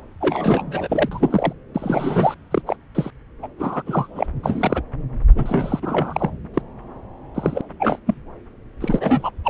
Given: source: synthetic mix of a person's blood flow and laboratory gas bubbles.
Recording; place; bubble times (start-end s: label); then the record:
Doppler ultrasound of blood flow; subclavian vein
0.21-1.53 s: bubbles
1.75-2.35 s: bubbles
2.50-2.62 s: bubbles
2.67-2.76 s: bubbles
2.94-3.10 s: bubbles
3.42-3.48 s: bubbles
3.58-3.82 s: bubbles
3.86-4.07 s: bubbles
4.15-4.26 s: bubbles
4.43-4.82 s: bubbles
5.35-6.30 s: bubbles
6.53-6.61 s: bubbles
7.34-7.61 s: bubbles
7.79-7.99 s: bubbles
8.06-8.15 s: bubbles
8.80-9.30 s: bubbles
9.44-9.49 s: bubbles
From the record:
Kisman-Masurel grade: 233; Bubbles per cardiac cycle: several, 3 to 8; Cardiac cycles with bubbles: 50 to 99%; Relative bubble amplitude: loud (0.450 to 0.775); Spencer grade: 3 (all of the cardiac periods contain showers or single bubble signals, but not dominating or overriding the cardiac motion signals); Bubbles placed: anywhere in the cardiac cycle